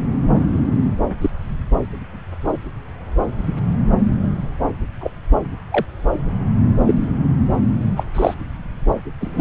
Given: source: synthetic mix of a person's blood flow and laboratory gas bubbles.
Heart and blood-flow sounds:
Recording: Doppler ultrasound of blood flow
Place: subclavian vein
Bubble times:
1.20-1.30 s: bubbles
5.00-5.11 s: bubbles
5.71-5.86 s: bubbles
6.87-6.95 s: bubbles
7.96-8.04 s: bubbles
8.14-8.34 s: bubbles
9.21-9.41 s: bubbles
From the record:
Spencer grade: 2 (many but less than half of the cardiac periods contain bubble signals, singularly or in groups)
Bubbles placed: anywhere in the cardiac cycle

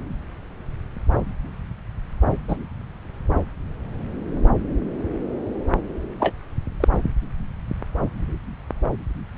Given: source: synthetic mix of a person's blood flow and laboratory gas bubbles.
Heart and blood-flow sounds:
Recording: Doppler ultrasound of blood flow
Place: subclavian vein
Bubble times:
2.48-2.57 s: bubbles
6.20-6.33 s: bubbles
6.80-6.88 s: bubbles
From the record:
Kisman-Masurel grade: 122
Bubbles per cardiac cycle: 1 to 2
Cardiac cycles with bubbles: 10 to 50%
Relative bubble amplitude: moderate (0.250 to 0.450)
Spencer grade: 2 (many but less than half of the cardiac periods contain bubble signals, singularly or in groups)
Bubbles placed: anywhere in the cardiac cycle

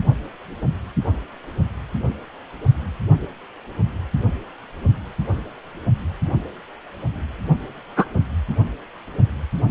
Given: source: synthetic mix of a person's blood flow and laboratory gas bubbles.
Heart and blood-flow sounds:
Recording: Doppler ultrasound of blood flow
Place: precordium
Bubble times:
7.96-8.06 s: bubbles
From the record:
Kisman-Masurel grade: 113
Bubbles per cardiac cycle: 1 to 2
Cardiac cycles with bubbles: 1 to 10%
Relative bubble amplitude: loud (0.450 to 0.775)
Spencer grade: 1 (occasional bubble signal discernible with the cardiac motion signal, with majority of cardiac periods free of bubbles)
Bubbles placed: only in the low amplitude regions of the cardiac cycle

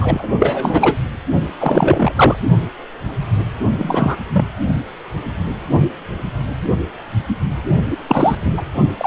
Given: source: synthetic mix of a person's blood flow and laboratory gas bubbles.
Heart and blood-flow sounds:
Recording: Doppler ultrasound of blood flow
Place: precordium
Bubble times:
0.00-0.29 s: bubbles
0.39-0.98 s: bubbles
1.59-2.12 s: bubbles
2.16-2.36 s: bubbles
3.79-4.17 s: bubbles
4.32-4.46 s: bubbles
7.90-7.98 s: bubbles
8.07-8.37 s: bubbles
8.44-8.63 s: bubbles
8.97-9.07 s: bubbles
From the record:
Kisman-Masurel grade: 333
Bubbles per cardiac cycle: rolling drumbeat, 9 or more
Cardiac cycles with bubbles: 50 to 99%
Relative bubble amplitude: loud (0.450 to 0.775)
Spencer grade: 3 (all of the cardiac periods contain showers or single bubble signals, but not dominating or overriding the cardiac motion signals)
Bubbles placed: only in the low amplitude regions of the cardiac cycle

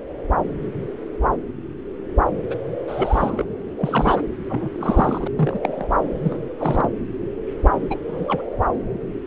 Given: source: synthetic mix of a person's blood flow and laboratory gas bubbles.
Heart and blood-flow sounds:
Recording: Doppler ultrasound of blood flow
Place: subclavian vein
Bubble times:
2.50-2.55 s: bubbles
2.87-3.45 s: bubbles
3.77-4.23 s: bubbles
4.49-4.70 s: bubbles
4.74-5.28 s: bubbles
5.35-5.60 s: bubbles
5.62-5.88 s: bubbles
6.23-6.39 s: bubbles
6.58-6.93 s: bubbles
7.90-7.98 s: bubbles
8.08-8.42 s: bubbles
From the record:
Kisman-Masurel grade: 232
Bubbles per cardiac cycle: several, 3 to 8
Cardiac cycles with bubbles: 50 to 99%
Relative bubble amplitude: moderate (0.250 to 0.450)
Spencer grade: 3 (all of the cardiac periods contain showers or single bubble signals, but not dominating or overriding the cardiac motion signals)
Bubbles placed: anywhere in the cardiac cycle

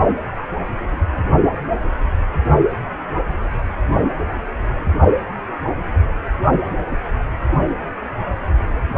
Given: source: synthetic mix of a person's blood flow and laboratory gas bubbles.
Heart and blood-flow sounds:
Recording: Doppler ultrasound of blood flow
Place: precordium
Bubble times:
no bubbles
From the record:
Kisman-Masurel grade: 000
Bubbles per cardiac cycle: 0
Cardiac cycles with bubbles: 0%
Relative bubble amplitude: no bubbles discernible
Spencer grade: 0 (complete lack of bubble signals)

